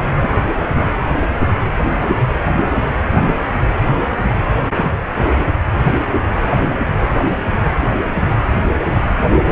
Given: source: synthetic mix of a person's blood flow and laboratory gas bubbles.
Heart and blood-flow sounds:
Doppler ultrasound of blood flow; precordium
0.21-0.29 s: bubbles
0.75-0.91 s: bubbles
From the record:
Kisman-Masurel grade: 121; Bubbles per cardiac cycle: 1 to 2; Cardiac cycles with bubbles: 10 to 50%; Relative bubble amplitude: barely perceptible (0.100 to 0.250); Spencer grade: 2 (many but less than half of the cardiac periods contain bubble signals, singularly or in groups); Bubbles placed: anywhere in the cardiac cycle

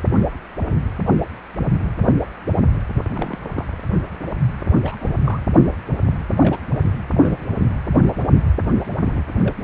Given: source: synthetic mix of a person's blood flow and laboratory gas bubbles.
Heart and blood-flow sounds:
Doppler ultrasound of blood flow; precordium
3.03-3.39 s: bubbles
3.50-3.66 s: bubbles
4.82-4.98 s: bubbles
5.00-5.13 s: bubbles
5.24-5.40 s: bubbles
6.40-6.58 s: bubbles
6.73-6.80 s: bubbles
7.14-7.49 s: bubbles
7.54-7.67 s: bubbles
9.05-9.23 s: bubbles
9.39-9.54 s: bubbles
From the record:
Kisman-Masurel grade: 221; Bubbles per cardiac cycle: several, 3 to 8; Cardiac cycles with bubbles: 10 to 50%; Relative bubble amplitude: barely perceptible (0.100 to 0.250); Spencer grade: 2 (many but less than half of the cardiac periods contain bubble signals, singularly or in groups); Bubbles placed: anywhere in the cardiac cycle

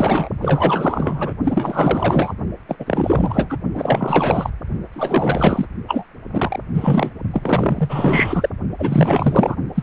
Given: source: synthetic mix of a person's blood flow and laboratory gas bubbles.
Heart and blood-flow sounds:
Doppler ultrasound of blood flow; precordium
0.00-0.29 s: bubbles
0.41-1.33 s: bubbles
1.44-2.34 s: bubbles
2.69-2.76 s: bubbles
2.79-3.58 s: bubbles
3.75-4.50 s: bubbles
4.92-5.66 s: bubbles
5.88-6.04 s: bubbles
6.31-6.60 s: bubbles
6.74-7.10 s: bubbles
7.33-8.49 s: bubbles
8.78-9.56 s: bubbles
9.75-9.83 s: bubbles
From the record:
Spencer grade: 4 (maximum detectable bubble signal sounding continuously throughout systole and diastole of every cardiac period, and overriding the amplitude of the normal cardiac signals); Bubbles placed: only in the low amplitude regions of the cardiac cycle

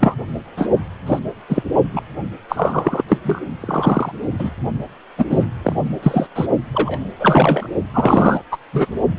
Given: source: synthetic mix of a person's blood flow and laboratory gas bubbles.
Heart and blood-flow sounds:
Doppler ultrasound of blood flow; precordium
0.00-0.15 s: bubbles
0.57-0.68 s: bubbles
1.06-1.19 s: bubbles
1.48-1.63 s: bubbles
1.93-2.01 s: bubbles
2.49-3.03 s: bubbles
3.08-3.18 s: bubbles
3.24-3.46 s: bubbles
3.60-4.11 s: bubbles
4.39-4.50 s: bubbles
5.18-5.25 s: bubbles
5.29-5.46 s: bubbles
5.63-5.73 s: bubbles
6.02-6.26 s: bubbles
6.34-6.46 s: bubbles
6.73-7.11 s: bubbles
7.19-7.68 s: bubbles
7.94-8.41 s: bubbles
8.52-8.58 s: bubbles
8.72-8.86 s: bubbles
From the record:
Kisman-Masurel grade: 233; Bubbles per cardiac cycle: several, 3 to 8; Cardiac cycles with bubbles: 50 to 99%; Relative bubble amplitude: loud (0.450 to 0.775); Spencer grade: 3 (all of the cardiac periods contain showers or single bubble signals, but not dominating or overriding the cardiac motion signals); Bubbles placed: only in the low amplitude regions of the cardiac cycle

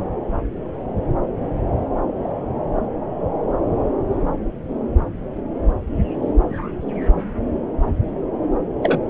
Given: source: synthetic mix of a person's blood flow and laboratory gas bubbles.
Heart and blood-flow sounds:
Doppler ultrasound of blood flow; subclavian vein
8.82-8.99 s: bubbles
From the record:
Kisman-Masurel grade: 113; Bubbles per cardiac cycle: 1 to 2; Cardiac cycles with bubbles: 1 to 10%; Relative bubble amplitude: loud (0.450 to 0.775); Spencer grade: 1 (occasional bubble signal discernible with the cardiac motion signal, with majority of cardiac periods free of bubbles); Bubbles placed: anywhere in the cardiac cycle

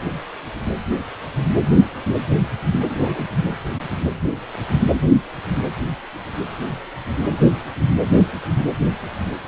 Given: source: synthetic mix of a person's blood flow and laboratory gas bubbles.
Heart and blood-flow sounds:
Doppler ultrasound of blood flow; precordium
2.71-3.30 s: bubbles
3.43-3.55 s: bubbles
From the record:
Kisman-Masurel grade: 211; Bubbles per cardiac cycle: several, 3 to 8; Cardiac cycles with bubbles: 1 to 10%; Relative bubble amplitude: barely perceptible (0.100 to 0.250); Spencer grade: 1 (occasional bubble signal discernible with the cardiac motion signal, with majority of cardiac periods free of bubbles); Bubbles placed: anywhere in the cardiac cycle

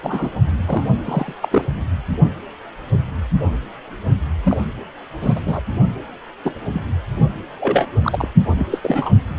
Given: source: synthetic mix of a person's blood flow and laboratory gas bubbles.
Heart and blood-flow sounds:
Doppler ultrasound of blood flow; precordium
0.03-0.32 s: bubbles
0.66-0.87 s: bubbles
1.04-1.32 s: bubbles
1.41-1.49 s: bubbles
1.51-1.65 s: bubbles
4.43-4.57 s: bubbles
5.21-5.41 s: bubbles
5.45-5.61 s: bubbles
6.45-6.54 s: bubbles
6.65-6.81 s: bubbles
7.59-7.88 s: bubbles
8.03-8.28 s: bubbles
8.40-8.55 s: bubbles
8.58-8.66 s: bubbles
8.71-8.80 s: bubbles
8.83-9.12 s: bubbles
From the record:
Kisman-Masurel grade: 232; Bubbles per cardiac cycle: several, 3 to 8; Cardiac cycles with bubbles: 50 to 99%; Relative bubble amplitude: moderate (0.250 to 0.450); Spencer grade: 3 (all of the cardiac periods contain showers or single bubble signals, but not dominating or overriding the cardiac motion signals); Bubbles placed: only in the low amplitude regions of the cardiac cycle

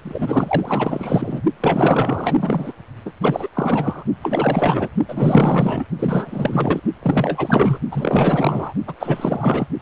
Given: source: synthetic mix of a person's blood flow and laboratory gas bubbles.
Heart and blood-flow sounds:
Doppler ultrasound of blood flow; precordium
0.03-1.41 s: bubbles
1.60-2.73 s: bubbles
3.05-3.12 s: bubbles
3.22-3.49 s: bubbles
3.55-4.04 s: bubbles
4.22-4.88 s: bubbles
5.08-5.84 s: bubbles
5.99-6.80 s: bubbles
7.02-7.79 s: bubbles
7.91-8.74 s: bubbles
8.87-8.95 s: bubbles
9.00-9.67 s: bubbles
9.79-9.82 s: bubbles
From the record:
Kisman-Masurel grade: 444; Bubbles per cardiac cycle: continuous sound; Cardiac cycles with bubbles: 100%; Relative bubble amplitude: maximal (0.775 to 0.999); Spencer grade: 4 (maximum detectable bubble signal sounding continuously throughout systole and diastole of every cardiac period, and overriding the amplitude of the normal cardiac signals); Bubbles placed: only in the low amplitude regions of the cardiac cycle

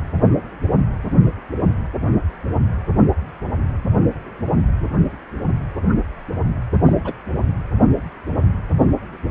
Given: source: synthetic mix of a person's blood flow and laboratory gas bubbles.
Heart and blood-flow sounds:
Doppler ultrasound of blood flow; precordium
6.85-7.13 s: bubbles
From the record:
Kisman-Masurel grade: 211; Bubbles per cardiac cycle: several, 3 to 8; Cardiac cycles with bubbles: 1 to 10%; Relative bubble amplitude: barely perceptible (0.100 to 0.250); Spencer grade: 1 (occasional bubble signal discernible with the cardiac motion signal, with majority of cardiac periods free of bubbles); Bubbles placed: anywhere in the cardiac cycle

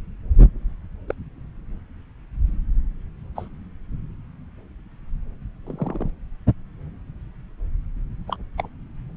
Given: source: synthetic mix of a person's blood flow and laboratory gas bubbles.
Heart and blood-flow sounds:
Doppler ultrasound of blood flow; subclavian vein
1.07-1.15 s: bubbles
3.35-3.48 s: bubbles
5.67-6.10 s: bubbles
8.28-8.37 s: bubbles
8.57-8.68 s: bubbles
From the record:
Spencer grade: 2 (many but less than half of the cardiac periods contain bubble signals, singularly or in groups); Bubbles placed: anywhere in the cardiac cycle

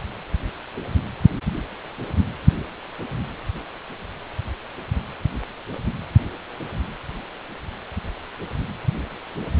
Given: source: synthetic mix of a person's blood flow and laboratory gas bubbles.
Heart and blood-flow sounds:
Doppler ultrasound of blood flow; precordium
no bubbles
From the record:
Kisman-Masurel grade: 000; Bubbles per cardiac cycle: 0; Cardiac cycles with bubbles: 0%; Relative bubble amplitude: no bubbles discernible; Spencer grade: 0 (complete lack of bubble signals)

